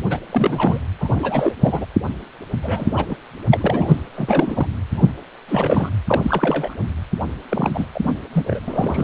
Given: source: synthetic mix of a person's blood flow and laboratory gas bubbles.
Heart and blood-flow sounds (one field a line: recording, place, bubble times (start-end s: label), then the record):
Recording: Doppler ultrasound of blood flow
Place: precordium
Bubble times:
0.09-0.19 s: bubbles
0.31-0.85 s: bubbles
1.00-1.53 s: bubbles
1.62-1.86 s: bubbles
2.62-3.05 s: bubbles
3.09-3.16 s: bubbles
3.50-3.96 s: bubbles
4.15-4.67 s: bubbles
4.95-5.10 s: bubbles
5.48-5.90 s: bubbles
6.06-6.74 s: bubbles
7.49-7.87 s: bubbles
7.95-8.18 s: bubbles
8.32-8.60 s: bubbles
8.67-9.04 s: bubbles
From the record:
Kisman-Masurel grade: 332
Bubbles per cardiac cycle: rolling drumbeat, 9 or more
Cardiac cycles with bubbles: 50 to 99%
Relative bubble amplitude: moderate (0.250 to 0.450)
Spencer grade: 3 (all of the cardiac periods contain showers or single bubble signals, but not dominating or overriding the cardiac motion signals)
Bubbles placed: anywhere in the cardiac cycle